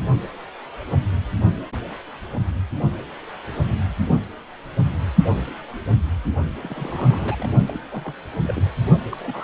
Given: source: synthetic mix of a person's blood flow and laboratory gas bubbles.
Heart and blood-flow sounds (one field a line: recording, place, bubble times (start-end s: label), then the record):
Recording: Doppler ultrasound of blood flow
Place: precordium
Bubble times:
6.62-7.48 s: bubbles
7.67-7.81 s: bubbles
7.91-8.13 s: bubbles
8.34-8.66 s: bubbles
9.12-9.17 s: bubbles
9.19-9.44 s: bubbles
From the record:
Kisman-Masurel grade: 221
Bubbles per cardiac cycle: several, 3 to 8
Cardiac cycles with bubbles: 10 to 50%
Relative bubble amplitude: barely perceptible (0.100 to 0.250)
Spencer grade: 2 (many but less than half of the cardiac periods contain bubble signals, singularly or in groups)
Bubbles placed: only in the low amplitude regions of the cardiac cycle